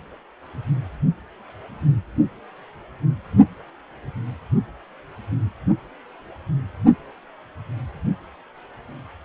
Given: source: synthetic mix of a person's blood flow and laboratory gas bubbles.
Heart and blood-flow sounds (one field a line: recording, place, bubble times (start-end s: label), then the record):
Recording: Doppler ultrasound of blood flow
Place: precordium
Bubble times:
no bubbles
From the record:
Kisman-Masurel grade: 000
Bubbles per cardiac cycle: 0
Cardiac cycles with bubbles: 0%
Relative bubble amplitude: no bubbles discernible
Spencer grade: 0 (complete lack of bubble signals)